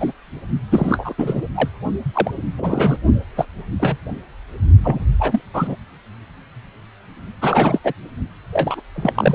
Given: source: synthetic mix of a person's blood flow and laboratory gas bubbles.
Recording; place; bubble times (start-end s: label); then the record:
Doppler ultrasound of blood flow; precordium
0.00-0.12 s: bubbles
0.71-1.14 s: bubbles
1.18-1.43 s: bubbles
1.54-1.70 s: bubbles
2.14-2.31 s: bubbles
2.58-2.97 s: bubbles
3.36-3.45 s: bubbles
3.79-3.97 s: bubbles
4.83-5.05 s: bubbles
5.19-5.42 s: bubbles
5.53-5.75 s: bubbles
7.42-7.79 s: bubbles
7.84-7.93 s: bubbles
8.52-8.81 s: bubbles
8.94-9.35 s: bubbles
From the record:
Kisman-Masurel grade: 233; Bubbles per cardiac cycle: several, 3 to 8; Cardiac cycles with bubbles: 50 to 99%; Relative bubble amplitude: loud (0.450 to 0.775); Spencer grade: 3 (all of the cardiac periods contain showers or single bubble signals, but not dominating or overriding the cardiac motion signals); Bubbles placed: only in the low amplitude regions of the cardiac cycle